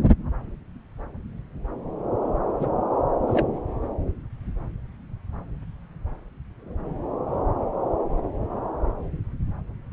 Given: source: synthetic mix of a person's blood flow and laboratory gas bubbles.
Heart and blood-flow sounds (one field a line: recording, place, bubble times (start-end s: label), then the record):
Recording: Doppler ultrasound of blood flow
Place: subclavian vein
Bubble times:
2.59-2.70 s: bubbles
3.28-3.47 s: bubbles
From the record:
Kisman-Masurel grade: 212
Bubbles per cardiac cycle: several, 3 to 8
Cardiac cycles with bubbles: 1 to 10%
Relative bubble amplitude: moderate (0.250 to 0.450)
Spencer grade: 1 (occasional bubble signal discernible with the cardiac motion signal, with majority of cardiac periods free of bubbles)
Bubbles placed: anywhere in the cardiac cycle